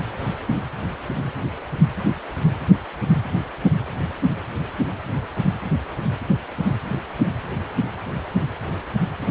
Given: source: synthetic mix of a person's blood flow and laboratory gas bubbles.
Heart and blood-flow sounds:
Doppler ultrasound of blood flow; precordium
9.29-9.31 s: bubbles
From the record:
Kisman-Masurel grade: 111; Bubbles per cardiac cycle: 1 to 2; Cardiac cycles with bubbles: 1 to 10%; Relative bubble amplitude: barely perceptible (0.100 to 0.250); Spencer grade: 1 (occasional bubble signal discernible with the cardiac motion signal, with majority of cardiac periods free of bubbles); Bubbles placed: anywhere in the cardiac cycle

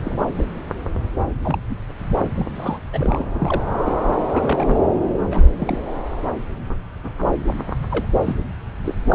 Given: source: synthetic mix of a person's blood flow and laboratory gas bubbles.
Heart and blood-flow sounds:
Doppler ultrasound of blood flow; subclavian vein
0.04-0.23 s: bubbles
0.35-0.48 s: bubbles
1.43-1.58 s: bubbles
1.69-1.75 s: bubbles
2.35-2.46 s: bubbles
2.54-2.79 s: bubbles
2.92-3.25 s: bubbles
3.32-3.63 s: bubbles
3.86-3.94 s: bubbles
4.33-4.76 s: bubbles
5.30-5.46 s: bubbles
5.58-5.78 s: bubbles
7.91-8.06 s: bubbles
8.25-8.36 s: bubbles
8.84-8.95 s: bubbles
9.09-9.15 s: bubbles
From the record:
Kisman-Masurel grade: 232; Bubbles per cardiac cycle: several, 3 to 8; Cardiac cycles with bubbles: 50 to 99%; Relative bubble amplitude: moderate (0.250 to 0.450); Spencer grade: 3 (all of the cardiac periods contain showers or single bubble signals, but not dominating or overriding the cardiac motion signals); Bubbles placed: anywhere in the cardiac cycle

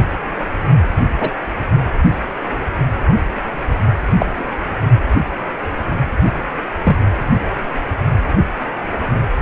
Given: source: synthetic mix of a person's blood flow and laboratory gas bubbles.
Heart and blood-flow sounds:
Doppler ultrasound of blood flow; precordium
1.20-1.31 s: bubbles
4.19-4.50 s: bubbles
6.84-6.97 s: bubbles
From the record:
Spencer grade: 2 (many but less than half of the cardiac periods contain bubble signals, singularly or in groups); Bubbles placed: anywhere in the cardiac cycle

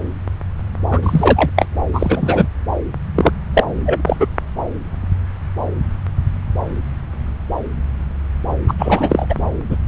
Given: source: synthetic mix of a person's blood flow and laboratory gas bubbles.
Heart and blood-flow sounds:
Doppler ultrasound of blood flow; subclavian vein
0.90-0.99 s: bubbles
1.02-1.51 s: bubbles
1.55-1.68 s: bubbles
1.93-2.48 s: bubbles
3.15-3.31 s: bubbles
3.54-3.64 s: bubbles
3.85-4.02 s: bubbles
4.06-4.16 s: bubbles
4.20-4.27 s: bubbles
8.68-8.74 s: bubbles
8.78-9.27 s: bubbles
9.29-9.35 s: bubbles
9.70-9.77 s: bubbles
From the record:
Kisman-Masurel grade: 233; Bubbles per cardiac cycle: several, 3 to 8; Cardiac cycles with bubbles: 50 to 99%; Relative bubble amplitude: loud (0.450 to 0.775); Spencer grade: 3 (all of the cardiac periods contain showers or single bubble signals, but not dominating or overriding the cardiac motion signals); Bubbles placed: anywhere in the cardiac cycle

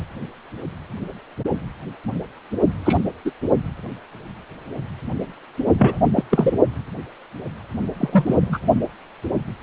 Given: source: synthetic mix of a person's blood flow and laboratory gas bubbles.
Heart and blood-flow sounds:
Doppler ultrasound of blood flow; precordium
2.85-3.04 s: bubbles
3.25-3.31 s: bubbles
5.78-5.99 s: bubbles
6.15-6.24 s: bubbles
6.31-6.54 s: bubbles
7.96-8.59 s: bubbles
From the record:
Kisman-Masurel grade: 223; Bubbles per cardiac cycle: several, 3 to 8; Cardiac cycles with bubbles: 10 to 50%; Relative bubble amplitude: loud (0.450 to 0.775); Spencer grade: 2 (many but less than half of the cardiac periods contain bubble signals, singularly or in groups); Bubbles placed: only in the low amplitude regions of the cardiac cycle

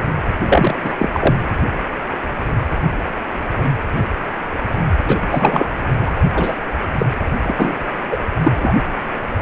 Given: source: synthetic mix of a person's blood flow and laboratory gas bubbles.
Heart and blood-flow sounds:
Doppler ultrasound of blood flow; precordium
0.48-0.75 s: bubbles
0.83-0.93 s: bubbles
0.98-1.09 s: bubbles
1.12-1.35 s: bubbles
5.07-5.19 s: bubbles
5.31-5.68 s: bubbles
6.00-6.16 s: bubbles
6.33-6.58 s: bubbles
6.98-7.06 s: bubbles
7.48-7.54 s: bubbles
7.57-7.76 s: bubbles
8.11-8.17 s: bubbles
8.43-8.52 s: bubbles
8.55-8.74 s: bubbles
From the record:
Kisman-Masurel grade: 223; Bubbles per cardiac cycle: several, 3 to 8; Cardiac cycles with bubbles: 10 to 50%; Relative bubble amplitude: loud (0.450 to 0.775); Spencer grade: 2 (many but less than half of the cardiac periods contain bubble signals, singularly or in groups); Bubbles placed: anywhere in the cardiac cycle

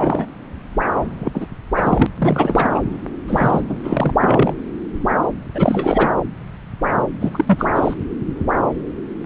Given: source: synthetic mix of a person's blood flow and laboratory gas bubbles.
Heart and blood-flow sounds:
Doppler ultrasound of blood flow; subclavian vein
0.00-0.26 s: bubbles
1.19-1.47 s: bubbles
1.77-2.06 s: bubbles
2.18-2.69 s: bubbles
2.75-2.83 s: bubbles
3.27-3.62 s: bubbles
3.67-3.77 s: bubbles
3.83-4.14 s: bubbles
4.20-4.54 s: bubbles
5.54-6.09 s: bubbles
7.20-7.67 s: bubbles
7.75-7.94 s: bubbles
From the record:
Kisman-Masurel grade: 333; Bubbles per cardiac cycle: rolling drumbeat, 9 or more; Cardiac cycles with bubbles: 50 to 99%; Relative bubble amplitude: loud (0.450 to 0.775); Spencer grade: 3 (all of the cardiac periods contain showers or single bubble signals, but not dominating or overriding the cardiac motion signals); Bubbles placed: anywhere in the cardiac cycle

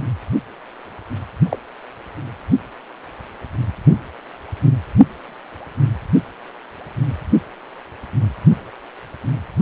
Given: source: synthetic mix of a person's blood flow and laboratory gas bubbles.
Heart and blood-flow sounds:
Doppler ultrasound of blood flow; precordium
1.49-1.58 s: bubbles
From the record:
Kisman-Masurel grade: 112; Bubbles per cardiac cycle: 1 to 2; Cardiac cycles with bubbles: 1 to 10%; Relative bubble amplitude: moderate (0.250 to 0.450); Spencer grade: 1 (occasional bubble signal discernible with the cardiac motion signal, with majority of cardiac periods free of bubbles); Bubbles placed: only in the low amplitude regions of the cardiac cycle

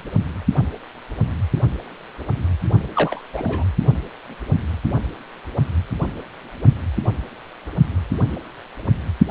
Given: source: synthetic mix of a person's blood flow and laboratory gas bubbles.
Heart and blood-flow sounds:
Doppler ultrasound of blood flow; precordium
2.95-3.20 s: bubbles
3.33-3.65 s: bubbles
From the record:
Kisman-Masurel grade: 112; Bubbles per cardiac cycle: 1 to 2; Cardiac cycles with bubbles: 1 to 10%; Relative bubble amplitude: moderate (0.250 to 0.450); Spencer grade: 1 (occasional bubble signal discernible with the cardiac motion signal, with majority of cardiac periods free of bubbles); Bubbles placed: anywhere in the cardiac cycle

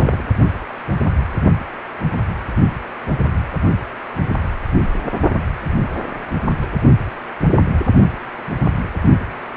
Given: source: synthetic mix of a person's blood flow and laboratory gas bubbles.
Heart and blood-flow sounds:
Doppler ultrasound of blood flow; precordium
0.00-0.23 s: bubbles
From the record:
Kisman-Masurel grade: 212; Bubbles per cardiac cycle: several, 3 to 8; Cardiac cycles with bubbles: 1 to 10%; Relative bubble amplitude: moderate (0.250 to 0.450); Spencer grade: 1 (occasional bubble signal discernible with the cardiac motion signal, with majority of cardiac periods free of bubbles); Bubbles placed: only in the low amplitude regions of the cardiac cycle

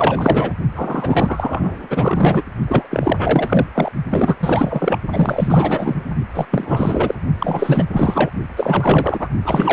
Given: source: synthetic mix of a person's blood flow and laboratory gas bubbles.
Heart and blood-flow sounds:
Doppler ultrasound of blood flow; precordium
0.00-0.55 s: bubbles
0.75-1.88 s: bubbles
1.90-2.45 s: bubbles
2.68-2.88 s: bubbles
2.90-3.67 s: bubbles
3.75-3.91 s: bubbles
4.11-4.36 s: bubbles
4.41-4.99 s: bubbles
5.12-5.96 s: bubbles
6.34-6.46 s: bubbles
6.50-7.15 s: bubbles
7.38-7.85 s: bubbles
7.93-8.29 s: bubbles
8.55-9.28 s: bubbles
9.46-9.73 s: bubbles
From the record:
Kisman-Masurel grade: 444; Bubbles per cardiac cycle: continuous sound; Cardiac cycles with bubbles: 100%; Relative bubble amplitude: maximal (0.775 to 0.999); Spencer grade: 4 (maximum detectable bubble signal sounding continuously throughout systole and diastole of every cardiac period, and overriding the amplitude of the normal cardiac signals); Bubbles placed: only in the low amplitude regions of the cardiac cycle

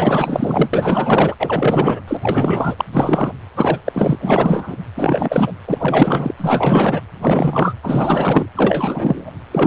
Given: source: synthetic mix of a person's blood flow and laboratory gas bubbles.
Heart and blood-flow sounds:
Doppler ultrasound of blood flow; precordium
0.00-0.69 s: bubbles
0.73-1.35 s: bubbles
1.40-2.02 s: bubbles
2.08-2.75 s: bubbles
2.79-2.85 s: bubbles
2.92-3.33 s: bubbles
3.56-3.79 s: bubbles
3.85-4.76 s: bubbles
4.96-5.52 s: bubbles
5.67-6.33 s: bubbles
6.38-7.01 s: bubbles
7.21-7.74 s: bubbles
7.82-8.46 s: bubbles
8.55-9.30 s: bubbles
9.51-9.66 s: bubbles
From the record:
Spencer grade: 4 (maximum detectable bubble signal sounding continuously throughout systole and diastole of every cardiac period, and overriding the amplitude of the normal cardiac signals); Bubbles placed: anywhere in the cardiac cycle

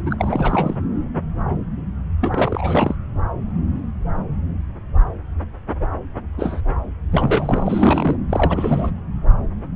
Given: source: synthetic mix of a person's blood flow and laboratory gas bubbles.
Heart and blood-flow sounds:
Doppler ultrasound of blood flow; subclavian vein
0.06-0.75 s: bubbles
2.21-2.96 s: bubbles
6.38-6.61 s: bubbles
7.12-8.16 s: bubbles
8.29-8.91 s: bubbles
From the record:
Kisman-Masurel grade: 332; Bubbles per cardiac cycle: rolling drumbeat, 9 or more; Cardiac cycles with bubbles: 50 to 99%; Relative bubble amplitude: moderate (0.250 to 0.450); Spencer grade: 3 (all of the cardiac periods contain showers or single bubble signals, but not dominating or overriding the cardiac motion signals); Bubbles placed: anywhere in the cardiac cycle

